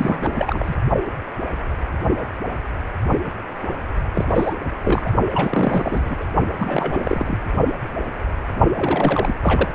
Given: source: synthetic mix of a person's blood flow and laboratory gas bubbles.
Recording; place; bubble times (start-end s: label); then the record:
Doppler ultrasound of blood flow; precordium
0.00-0.75 s: bubbles
4.14-4.55 s: bubbles
4.82-5.13 s: bubbles
5.34-6.17 s: bubbles
6.20-6.25 s: bubbles
6.55-7.38 s: bubbles
8.77-9.38 s: bubbles
9.41-9.71 s: bubbles
From the record:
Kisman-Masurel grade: 332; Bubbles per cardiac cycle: rolling drumbeat, 9 or more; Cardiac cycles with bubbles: 50 to 99%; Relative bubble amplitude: moderate (0.250 to 0.450); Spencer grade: 3 (all of the cardiac periods contain showers or single bubble signals, but not dominating or overriding the cardiac motion signals); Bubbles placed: only in the low amplitude regions of the cardiac cycle